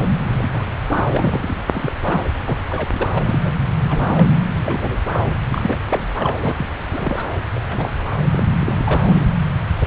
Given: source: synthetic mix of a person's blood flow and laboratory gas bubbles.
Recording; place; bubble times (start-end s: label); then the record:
Doppler ultrasound of blood flow; subclavian vein
0.00-0.02 s: bubbles
0.33-0.76 s: bubbles
0.90-1.04 s: bubbles
1.11-1.64 s: bubbles
1.72-1.92 s: bubbles
2.05-2.25 s: bubbles
2.46-2.66 s: bubbles
2.70-2.88 s: bubbles
2.91-3.19 s: bubbles
3.23-3.52 s: bubbles
3.85-4.29 s: bubbles
4.57-4.98 s: bubbles
5.12-5.25 s: bubbles
5.50-5.79 s: bubbles
5.88-6.10 s: bubbles
6.17-6.38 s: bubbles
6.43-6.54 s: bubbles
6.57-6.66 s: bubbles
6.90-7.24 s: bubbles
7.55-7.90 s: bubbles
8.32-9.00 s: bubbles
9.08-9.26 s: bubbles
9.78-9.86 s: bubbles
From the record:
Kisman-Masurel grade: 232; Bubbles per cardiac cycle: several, 3 to 8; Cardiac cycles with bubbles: 50 to 99%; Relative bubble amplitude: moderate (0.250 to 0.450); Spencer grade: 3 (all of the cardiac periods contain showers or single bubble signals, but not dominating or overriding the cardiac motion signals); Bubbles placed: anywhere in the cardiac cycle